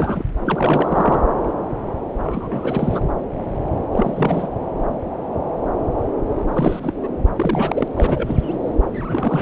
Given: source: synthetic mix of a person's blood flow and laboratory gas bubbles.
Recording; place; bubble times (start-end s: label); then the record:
Doppler ultrasound of blood flow; subclavian vein
0.00-0.24 s: bubbles
0.45-1.21 s: bubbles
2.23-3.02 s: bubbles
3.92-4.48 s: bubbles
6.51-6.93 s: bubbles
7.01-7.08 s: bubbles
7.35-7.88 s: bubbles
7.94-8.59 s: bubbles
8.93-9.42 s: bubbles
From the record:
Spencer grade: 3 (all of the cardiac periods contain showers or single bubble signals, but not dominating or overriding the cardiac motion signals); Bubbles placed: anywhere in the cardiac cycle